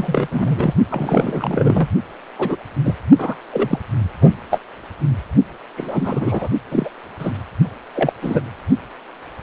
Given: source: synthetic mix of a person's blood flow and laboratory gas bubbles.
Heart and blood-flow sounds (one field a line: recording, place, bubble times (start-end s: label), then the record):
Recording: Doppler ultrasound of blood flow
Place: precordium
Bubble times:
0.00-0.28 s: bubbles
0.31-0.73 s: bubbles
0.91-1.89 s: bubbles
2.38-2.56 s: bubbles
2.84-2.96 s: bubbles
3.18-3.36 s: bubbles
3.52-3.79 s: bubbles
4.21-4.33 s: bubbles
4.50-4.58 s: bubbles
5.77-6.48 s: bubbles
6.71-6.89 s: bubbles
7.18-7.31 s: bubbles
7.95-8.12 s: bubbles
8.21-8.41 s: bubbles
From the record:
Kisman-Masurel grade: 232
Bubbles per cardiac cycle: several, 3 to 8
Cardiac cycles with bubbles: 50 to 99%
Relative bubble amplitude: moderate (0.250 to 0.450)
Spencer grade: 3 (all of the cardiac periods contain showers or single bubble signals, but not dominating or overriding the cardiac motion signals)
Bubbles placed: only in the low amplitude regions of the cardiac cycle